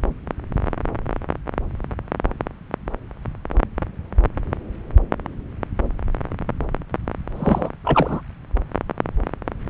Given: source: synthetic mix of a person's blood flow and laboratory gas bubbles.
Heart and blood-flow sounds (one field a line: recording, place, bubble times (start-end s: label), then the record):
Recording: Doppler ultrasound of blood flow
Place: subclavian vein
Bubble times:
7.34-7.70 s: bubbles
7.83-8.21 s: bubbles
From the record:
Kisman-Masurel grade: 213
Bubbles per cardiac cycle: several, 3 to 8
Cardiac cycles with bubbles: 1 to 10%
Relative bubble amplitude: loud (0.450 to 0.775)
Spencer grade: 1 (occasional bubble signal discernible with the cardiac motion signal, with majority of cardiac periods free of bubbles)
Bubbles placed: anywhere in the cardiac cycle